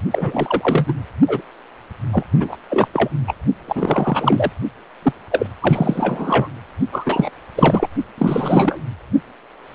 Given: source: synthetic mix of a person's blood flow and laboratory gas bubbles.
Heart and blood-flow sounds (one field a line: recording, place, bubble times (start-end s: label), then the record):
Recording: Doppler ultrasound of blood flow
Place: precordium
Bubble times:
0.10-0.92 s: bubbles
1.27-1.41 s: bubbles
2.12-2.23 s: bubbles
2.40-2.57 s: bubbles
2.70-2.88 s: bubbles
2.93-3.09 s: bubbles
3.27-3.35 s: bubbles
3.67-4.52 s: bubbles
5.03-5.12 s: bubbles
5.32-5.47 s: bubbles
5.60-6.48 s: bubbles
6.92-7.30 s: bubbles
7.56-7.88 s: bubbles
8.17-8.80 s: bubbles
From the record:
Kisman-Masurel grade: 333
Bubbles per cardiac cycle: rolling drumbeat, 9 or more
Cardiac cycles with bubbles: 50 to 99%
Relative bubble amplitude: loud (0.450 to 0.775)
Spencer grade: 3 (all of the cardiac periods contain showers or single bubble signals, but not dominating or overriding the cardiac motion signals)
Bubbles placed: only in the low amplitude regions of the cardiac cycle